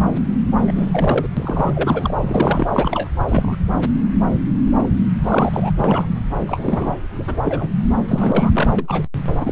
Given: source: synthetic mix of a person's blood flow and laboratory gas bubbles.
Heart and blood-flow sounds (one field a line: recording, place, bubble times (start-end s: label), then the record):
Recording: Doppler ultrasound of blood flow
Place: subclavian vein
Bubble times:
0.67-1.28 s: bubbles
1.36-2.14 s: bubbles
2.24-2.68 s: bubbles
2.71-3.08 s: bubbles
3.28-3.57 s: bubbles
4.66-4.71 s: bubbles
4.77-4.88 s: bubbles
5.21-5.73 s: bubbles
5.78-6.06 s: bubbles
6.47-6.96 s: bubbles
7.17-7.38 s: bubbles
7.42-7.75 s: bubbles
8.08-8.51 s: bubbles
8.54-8.69 s: bubbles
8.78-9.03 s: bubbles
9.39-9.52 s: bubbles
From the record:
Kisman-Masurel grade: 232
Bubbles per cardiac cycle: several, 3 to 8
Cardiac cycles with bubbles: 50 to 99%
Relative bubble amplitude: moderate (0.250 to 0.450)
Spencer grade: 3 (all of the cardiac periods contain showers or single bubble signals, but not dominating or overriding the cardiac motion signals)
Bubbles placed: anywhere in the cardiac cycle